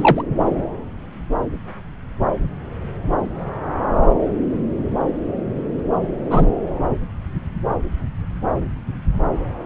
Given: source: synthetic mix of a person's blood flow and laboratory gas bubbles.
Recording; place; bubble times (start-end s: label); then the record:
Doppler ultrasound of blood flow; subclavian vein
0.00-0.22 s: bubbles
6.29-6.46 s: bubbles
From the record:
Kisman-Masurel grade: 123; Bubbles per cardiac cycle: 1 to 2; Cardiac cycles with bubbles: 10 to 50%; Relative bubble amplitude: loud (0.450 to 0.775); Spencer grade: 2 (many but less than half of the cardiac periods contain bubble signals, singularly or in groups); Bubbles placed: anywhere in the cardiac cycle